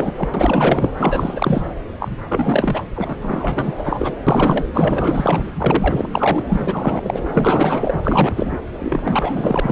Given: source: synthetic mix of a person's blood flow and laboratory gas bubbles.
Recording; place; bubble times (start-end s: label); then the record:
Doppler ultrasound of blood flow; subclavian vein
0.00-0.14 s: bubbles
0.16-0.29 s: bubbles
0.33-0.91 s: bubbles
0.97-1.64 s: bubbles
1.99-2.08 s: bubbles
2.28-2.83 s: bubbles
2.95-3.15 s: bubbles
3.21-4.15 s: bubbles
4.27-4.65 s: bubbles
4.74-5.45 s: bubbles
5.57-6.44 s: bubbles
6.50-7.20 s: bubbles
7.33-8.02 s: bubbles
8.04-8.58 s: bubbles
8.79-9.60 s: bubbles
9.62-9.72 s: bubbles
From the record:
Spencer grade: 4 (maximum detectable bubble signal sounding continuously throughout systole and diastole of every cardiac period, and overriding the amplitude of the normal cardiac signals); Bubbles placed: anywhere in the cardiac cycle